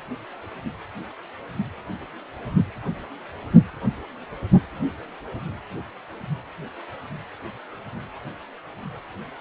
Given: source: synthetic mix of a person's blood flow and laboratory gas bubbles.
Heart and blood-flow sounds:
Doppler ultrasound of blood flow; precordium
no bubbles
From the record:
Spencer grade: 0 (complete lack of bubble signals)

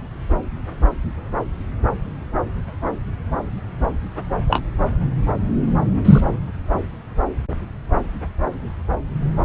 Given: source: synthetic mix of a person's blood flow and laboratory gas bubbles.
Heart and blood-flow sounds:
Doppler ultrasound of blood flow; subclavian vein
4.48-4.64 s: bubbles
6.04-6.21 s: bubbles
From the record:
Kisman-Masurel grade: 113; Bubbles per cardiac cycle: 1 to 2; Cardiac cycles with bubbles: 1 to 10%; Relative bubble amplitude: loud (0.450 to 0.775); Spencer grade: 1 (occasional bubble signal discernible with the cardiac motion signal, with majority of cardiac periods free of bubbles); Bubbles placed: anywhere in the cardiac cycle

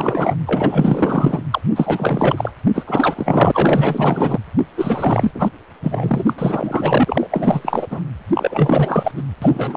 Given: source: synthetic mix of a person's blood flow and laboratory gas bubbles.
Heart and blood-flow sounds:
Doppler ultrasound of blood flow; precordium
0.00-0.36 s: bubbles
0.46-1.42 s: bubbles
1.50-1.61 s: bubbles
1.76-2.51 s: bubbles
2.73-4.38 s: bubbles
4.58-4.64 s: bubbles
4.77-5.50 s: bubbles
5.83-6.33 s: bubbles
6.38-7.28 s: bubbles
7.31-7.88 s: bubbles
7.90-8.00 s: bubbles
8.34-9.12 s: bubbles
9.16-9.22 s: bubbles
9.41-9.77 s: bubbles
From the record:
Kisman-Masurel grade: 444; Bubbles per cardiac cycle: continuous sound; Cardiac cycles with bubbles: 100%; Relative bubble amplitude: maximal (0.775 to 0.999); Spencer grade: 4 (maximum detectable bubble signal sounding continuously throughout systole and diastole of every cardiac period, and overriding the amplitude of the normal cardiac signals); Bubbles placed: anywhere in the cardiac cycle

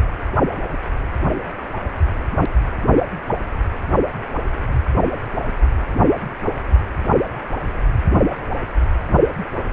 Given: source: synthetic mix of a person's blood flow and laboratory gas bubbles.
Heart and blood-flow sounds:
Doppler ultrasound of blood flow; precordium
no bubbles
From the record:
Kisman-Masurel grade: 000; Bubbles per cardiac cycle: 0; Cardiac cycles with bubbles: 0%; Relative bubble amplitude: no bubbles discernible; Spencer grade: 0 (complete lack of bubble signals)

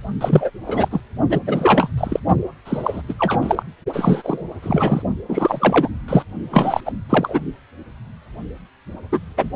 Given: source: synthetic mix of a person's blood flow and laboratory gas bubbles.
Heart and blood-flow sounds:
Doppler ultrasound of blood flow; precordium
0.20-0.51 s: bubbles
0.67-0.88 s: bubbles
0.90-1.01 s: bubbles
1.29-1.40 s: bubbles
1.46-1.90 s: bubbles
1.97-2.19 s: bubbles
2.65-3.02 s: bubbles
3.08-3.13 s: bubbles
3.19-3.63 s: bubbles
3.93-4.44 s: bubbles
4.62-5.03 s: bubbles
5.29-5.89 s: bubbles
6.08-6.23 s: bubbles
6.51-6.81 s: bubbles
6.85-6.93 s: bubbles
7.09-7.40 s: bubbles
9.12-9.20 s: bubbles
9.37-9.51 s: bubbles
From the record:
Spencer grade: 3 (all of the cardiac periods contain showers or single bubble signals, but not dominating or overriding the cardiac motion signals); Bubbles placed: only in the low amplitude regions of the cardiac cycle

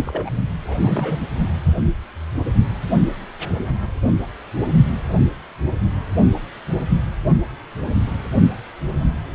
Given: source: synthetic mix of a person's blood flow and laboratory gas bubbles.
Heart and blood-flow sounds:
Doppler ultrasound of blood flow; precordium
0.05-0.30 s: bubbles
0.67-1.20 s: bubbles
From the record:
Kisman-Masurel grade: 211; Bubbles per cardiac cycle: several, 3 to 8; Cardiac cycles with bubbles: 1 to 10%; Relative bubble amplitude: barely perceptible (0.100 to 0.250); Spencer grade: 1 (occasional bubble signal discernible with the cardiac motion signal, with majority of cardiac periods free of bubbles); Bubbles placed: only in the low amplitude regions of the cardiac cycle

